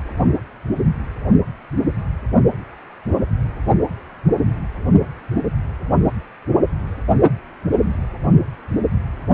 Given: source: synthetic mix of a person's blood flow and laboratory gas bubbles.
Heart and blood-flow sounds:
Doppler ultrasound of blood flow; precordium
no bubbles
From the record:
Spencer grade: 0 (complete lack of bubble signals)

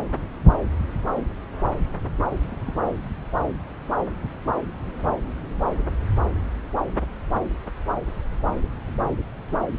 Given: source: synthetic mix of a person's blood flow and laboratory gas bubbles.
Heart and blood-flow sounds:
Doppler ultrasound of blood flow; subclavian vein
2.30-2.74 s: bubbles
From the record:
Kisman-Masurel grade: 111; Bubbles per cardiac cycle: 1 to 2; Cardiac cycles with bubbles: 1 to 10%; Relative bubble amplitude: barely perceptible (0.100 to 0.250); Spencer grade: 1 (occasional bubble signal discernible with the cardiac motion signal, with majority of cardiac periods free of bubbles); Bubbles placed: anywhere in the cardiac cycle

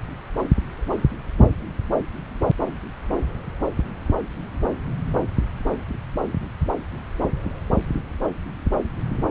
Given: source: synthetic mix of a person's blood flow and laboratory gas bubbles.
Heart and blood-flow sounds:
Doppler ultrasound of blood flow; subclavian vein
no bubbles
From the record:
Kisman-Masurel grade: 000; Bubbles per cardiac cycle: 0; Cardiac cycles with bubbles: 0%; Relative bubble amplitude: no bubbles discernible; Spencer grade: 0 (complete lack of bubble signals)

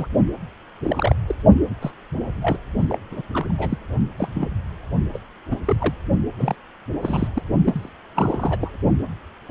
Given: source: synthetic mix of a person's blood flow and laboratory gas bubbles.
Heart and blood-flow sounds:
Doppler ultrasound of blood flow; precordium
0.00-0.07 s: bubbles
0.83-1.14 s: bubbles
1.28-1.35 s: bubbles
1.81-1.91 s: bubbles
2.42-2.57 s: bubbles
2.89-2.99 s: bubbles
3.11-3.22 s: bubbles
3.33-3.46 s: bubbles
3.49-3.52 s: bubbles
3.58-3.78 s: bubbles
4.17-4.29 s: bubbles
4.34-4.50 s: bubbles
5.13-5.18 s: bubbles
5.50-5.57 s: bubbles
5.66-5.95 s: bubbles
6.38-6.55 s: bubbles
7.02-7.28 s: bubbles
7.33-7.42 s: bubbles
7.65-7.90 s: bubbles
8.14-8.57 s: bubbles
8.60-8.70 s: bubbles
9.48-9.51 s: bubbles
From the record:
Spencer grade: 3 (all of the cardiac periods contain showers or single bubble signals, but not dominating or overriding the cardiac motion signals); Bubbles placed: only in the low amplitude regions of the cardiac cycle

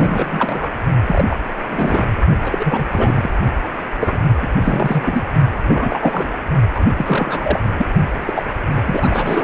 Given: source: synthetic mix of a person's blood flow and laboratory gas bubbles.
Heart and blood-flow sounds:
Doppler ultrasound of blood flow; precordium
0.00-0.71 s: bubbles
1.04-1.25 s: bubbles
1.30-1.37 s: bubbles
1.68-2.06 s: bubbles
2.42-2.85 s: bubbles
2.90-3.30 s: bubbles
4.00-4.18 s: bubbles
4.42-4.46 s: bubbles
4.57-5.24 s: bubbles
5.68-5.99 s: bubbles
6.02-6.30 s: bubbles
6.75-6.86 s: bubbles
6.96-7.60 s: bubbles
7.76-7.87 s: bubbles
8.21-8.43 s: bubbles
8.50-8.55 s: bubbles
8.75-9.44 s: bubbles
From the record:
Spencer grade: 3 (all of the cardiac periods contain showers or single bubble signals, but not dominating or overriding the cardiac motion signals); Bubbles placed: only in the low amplitude regions of the cardiac cycle

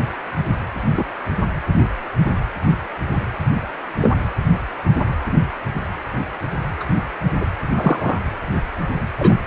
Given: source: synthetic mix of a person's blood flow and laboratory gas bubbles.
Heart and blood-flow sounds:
Doppler ultrasound of blood flow; precordium
0.92-1.04 s: bubbles
4.01-4.12 s: bubbles
6.80-6.84 s: bubbles
7.41-7.46 s: bubbles
7.77-8.18 s: bubbles
9.17-9.43 s: bubbles
From the record:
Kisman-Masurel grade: 123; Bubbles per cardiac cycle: 1 to 2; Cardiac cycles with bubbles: 10 to 50%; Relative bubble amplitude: loud (0.450 to 0.775); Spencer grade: 2 (many but less than half of the cardiac periods contain bubble signals, singularly or in groups); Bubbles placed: anywhere in the cardiac cycle

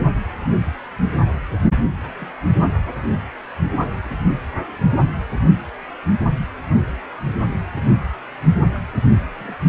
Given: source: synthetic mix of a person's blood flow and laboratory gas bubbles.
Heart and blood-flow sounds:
Doppler ultrasound of blood flow; precordium
0.39-0.55 s: bubbles
2.03-2.12 s: bubbles
2.20-2.27 s: bubbles
3.69-3.75 s: bubbles
4.03-4.17 s: bubbles
8.74-8.78 s: bubbles
9.22-9.55 s: bubbles
From the record:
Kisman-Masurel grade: 121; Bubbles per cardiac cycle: 1 to 2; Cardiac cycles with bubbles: 10 to 50%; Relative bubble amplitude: barely perceptible (0.100 to 0.250); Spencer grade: 2 (many but less than half of the cardiac periods contain bubble signals, singularly or in groups); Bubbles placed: only in the low amplitude regions of the cardiac cycle

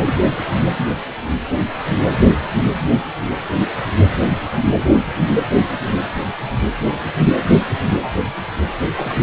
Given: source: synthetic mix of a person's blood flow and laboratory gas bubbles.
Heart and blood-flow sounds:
Doppler ultrasound of blood flow; precordium
8.96-9.23 s: bubbles
From the record:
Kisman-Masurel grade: 111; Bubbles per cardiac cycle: 1 to 2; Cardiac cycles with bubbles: 1 to 10%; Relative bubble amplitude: barely perceptible (0.100 to 0.250); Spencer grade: 1 (occasional bubble signal discernible with the cardiac motion signal, with majority of cardiac periods free of bubbles); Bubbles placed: anywhere in the cardiac cycle

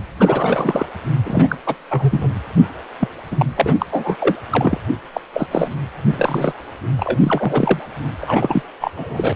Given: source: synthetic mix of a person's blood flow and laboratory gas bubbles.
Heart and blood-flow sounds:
Doppler ultrasound of blood flow; precordium
0.18-0.86 s: bubbles
1.25-1.57 s: bubbles
1.66-1.75 s: bubbles
1.90-2.31 s: bubbles
3.00-3.08 s: bubbles
3.31-3.46 s: bubbles
3.56-3.85 s: bubbles
3.92-4.16 s: bubbles
4.18-4.35 s: bubbles
4.50-4.78 s: bubbles
5.13-5.20 s: bubbles
5.33-5.47 s: bubbles
5.50-5.75 s: bubbles
6.13-6.53 s: bubbles
6.97-7.86 s: bubbles
8.21-8.62 s: bubbles
8.80-8.92 s: bubbles
8.96-9.33 s: bubbles
From the record:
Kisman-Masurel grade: 342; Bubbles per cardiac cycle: rolling drumbeat, 9 or more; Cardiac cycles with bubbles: 100%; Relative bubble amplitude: moderate (0.250 to 0.450); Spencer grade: 3 (all of the cardiac periods contain showers or single bubble signals, but not dominating or overriding the cardiac motion signals); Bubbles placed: anywhere in the cardiac cycle

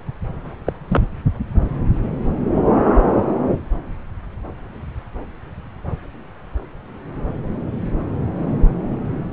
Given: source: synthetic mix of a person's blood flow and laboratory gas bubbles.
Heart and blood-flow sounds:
Doppler ultrasound of blood flow; subclavian vein
0.66-0.72 s: bubbles
0.88-1.04 s: bubbles
From the record:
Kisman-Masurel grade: 112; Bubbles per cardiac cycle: 1 to 2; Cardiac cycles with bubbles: 1 to 10%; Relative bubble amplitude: moderate (0.250 to 0.450); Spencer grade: 1 (occasional bubble signal discernible with the cardiac motion signal, with majority of cardiac periods free of bubbles); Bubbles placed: anywhere in the cardiac cycle

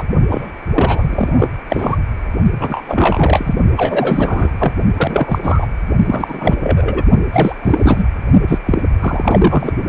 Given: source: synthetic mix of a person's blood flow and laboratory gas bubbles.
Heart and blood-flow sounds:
Doppler ultrasound of blood flow; precordium
0.00-0.04 s: bubbles
0.29-0.52 s: bubbles
0.74-1.50 s: bubbles
1.69-1.97 s: bubbles
2.58-3.54 s: bubbles
3.77-4.53 s: bubbles
4.59-4.72 s: bubbles
4.97-5.39 s: bubbles
5.43-5.66 s: bubbles
6.05-6.56 s: bubbles
6.62-7.04 s: bubbles
7.32-7.56 s: bubbles
7.62-8.05 s: bubbles
8.47-8.59 s: bubbles
8.65-8.86 s: bubbles
9.00-9.74 s: bubbles
From the record:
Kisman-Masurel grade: 333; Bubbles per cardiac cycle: rolling drumbeat, 9 or more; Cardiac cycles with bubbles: 50 to 99%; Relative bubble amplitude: loud (0.450 to 0.775); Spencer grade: 3 (all of the cardiac periods contain showers or single bubble signals, but not dominating or overriding the cardiac motion signals); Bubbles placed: only in the low amplitude regions of the cardiac cycle

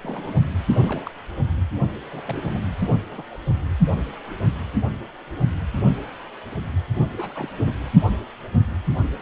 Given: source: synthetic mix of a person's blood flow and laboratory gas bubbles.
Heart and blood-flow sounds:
Doppler ultrasound of blood flow; precordium
0.04-0.39 s: bubbles
0.82-1.11 s: bubbles
2.11-2.22 s: bubbles
2.25-2.60 s: bubbles
2.79-2.90 s: bubbles
3.10-3.22 s: bubbles
3.30-3.37 s: bubbles
7.17-7.50 s: bubbles
7.56-7.72 s: bubbles
From the record:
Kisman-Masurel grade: 221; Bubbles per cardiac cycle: several, 3 to 8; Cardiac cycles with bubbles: 10 to 50%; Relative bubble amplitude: barely perceptible (0.100 to 0.250); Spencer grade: 2 (many but less than half of the cardiac periods contain bubble signals, singularly or in groups); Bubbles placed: anywhere in the cardiac cycle

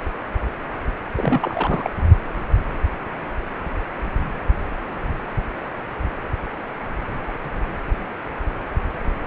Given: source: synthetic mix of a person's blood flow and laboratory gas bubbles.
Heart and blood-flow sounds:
Doppler ultrasound of blood flow; precordium
1.15-1.90 s: bubbles
From the record:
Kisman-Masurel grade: 222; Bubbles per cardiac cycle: several, 3 to 8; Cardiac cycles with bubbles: 10 to 50%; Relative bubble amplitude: moderate (0.250 to 0.450); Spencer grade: 2 (many but less than half of the cardiac periods contain bubble signals, singularly or in groups); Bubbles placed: anywhere in the cardiac cycle

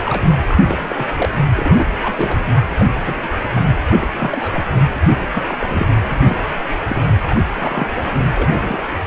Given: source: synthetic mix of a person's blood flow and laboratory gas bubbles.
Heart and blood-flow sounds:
Doppler ultrasound of blood flow; precordium
0.05-0.29 s: bubbles
0.38-1.07 s: bubbles
1.17-1.29 s: bubbles
1.56-1.94 s: bubbles
2.02-2.37 s: bubbles
2.79-2.85 s: bubbles
2.93-3.38 s: bubbles
3.52-3.69 s: bubbles
3.88-4.08 s: bubbles
4.12-4.72 s: bubbles
5.12-5.16 s: bubbles
5.34-5.42 s: bubbles
5.47-5.88 s: bubbles
6.04-6.11 s: bubbles
6.20-6.37 s: bubbles
6.88-7.05 s: bubbles
7.29-7.40 s: bubbles
7.58-7.87 s: bubbles
7.96-8.09 s: bubbles
8.35-8.86 s: bubbles
From the record:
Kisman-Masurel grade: 242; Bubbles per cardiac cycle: several, 3 to 8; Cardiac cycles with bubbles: 100%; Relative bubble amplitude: moderate (0.250 to 0.450); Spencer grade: 3 (all of the cardiac periods contain showers or single bubble signals, but not dominating or overriding the cardiac motion signals); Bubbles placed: anywhere in the cardiac cycle

